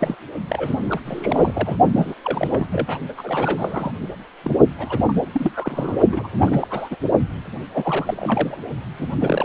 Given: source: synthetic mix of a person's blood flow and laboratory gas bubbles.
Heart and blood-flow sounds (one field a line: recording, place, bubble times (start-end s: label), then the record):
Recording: Doppler ultrasound of blood flow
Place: precordium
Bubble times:
0.00-0.15 s: bubbles
0.48-0.77 s: bubbles
0.90-1.00 s: bubbles
1.04-1.77 s: bubbles
1.93-2.15 s: bubbles
2.23-2.67 s: bubbles
2.72-2.98 s: bubbles
3.08-3.12 s: bubbles
3.17-3.91 s: bubbles
4.43-4.57 s: bubbles
4.78-5.19 s: bubbles
5.32-5.96 s: bubbles
6.12-6.28 s: bubbles
6.33-6.67 s: bubbles
6.70-6.97 s: bubbles
7.73-8.58 s: bubbles
8.97-9.07 s: bubbles
9.20-9.45 s: bubbles
From the record:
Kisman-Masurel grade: 342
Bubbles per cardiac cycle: rolling drumbeat, 9 or more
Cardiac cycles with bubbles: 100%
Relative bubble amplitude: moderate (0.250 to 0.450)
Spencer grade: 3 (all of the cardiac periods contain showers or single bubble signals, but not dominating or overriding the cardiac motion signals)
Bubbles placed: only in the low amplitude regions of the cardiac cycle